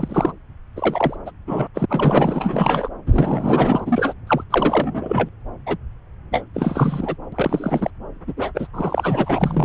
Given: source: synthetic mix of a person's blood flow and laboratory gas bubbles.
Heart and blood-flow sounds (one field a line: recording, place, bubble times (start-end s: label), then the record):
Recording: Doppler ultrasound of blood flow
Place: subclavian vein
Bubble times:
0.00-0.32 s: bubbles
0.76-1.17 s: bubbles
1.26-1.31 s: bubbles
1.47-1.68 s: bubbles
1.74-1.85 s: bubbles
1.89-2.89 s: bubbles
3.06-4.13 s: bubbles
4.27-4.44 s: bubbles
4.50-5.29 s: bubbles
5.66-5.77 s: bubbles
6.32-6.45 s: bubbles
6.54-7.17 s: bubbles
7.32-7.90 s: bubbles
8.27-8.34 s: bubbles
8.37-8.52 s: bubbles
8.54-8.68 s: bubbles
8.73-9.65 s: bubbles
From the record:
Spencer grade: 4 (maximum detectable bubble signal sounding continuously throughout systole and diastole of every cardiac period, and overriding the amplitude of the normal cardiac signals)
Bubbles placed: anywhere in the cardiac cycle